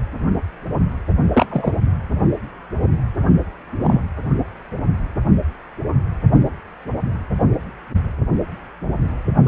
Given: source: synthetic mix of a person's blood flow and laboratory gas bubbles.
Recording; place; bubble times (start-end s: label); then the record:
Doppler ultrasound of blood flow; precordium
1.33-1.45 s: bubbles
1.50-1.72 s: bubbles
3.80-4.01 s: bubbles
9.46-9.48 s: bubbles
From the record:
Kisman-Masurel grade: 122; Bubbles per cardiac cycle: 1 to 2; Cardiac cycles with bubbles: 10 to 50%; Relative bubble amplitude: moderate (0.250 to 0.450); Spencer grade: 2 (many but less than half of the cardiac periods contain bubble signals, singularly or in groups); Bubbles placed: anywhere in the cardiac cycle